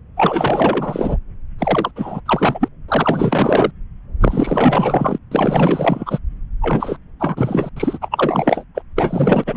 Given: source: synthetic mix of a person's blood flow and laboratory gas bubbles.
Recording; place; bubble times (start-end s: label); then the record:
Doppler ultrasound of blood flow; subclavian vein
0.16-1.17 s: bubbles
1.58-1.91 s: bubbles
1.96-2.21 s: bubbles
2.26-2.69 s: bubbles
2.88-3.71 s: bubbles
4.21-5.18 s: bubbles
5.31-6.19 s: bubbles
6.61-6.97 s: bubbles
7.20-7.70 s: bubbles
7.76-7.99 s: bubbles
8.01-8.64 s: bubbles
8.75-8.82 s: bubbles
8.96-9.57 s: bubbles
From the record:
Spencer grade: 4 (maximum detectable bubble signal sounding continuously throughout systole and diastole of every cardiac period, and overriding the amplitude of the normal cardiac signals); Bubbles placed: anywhere in the cardiac cycle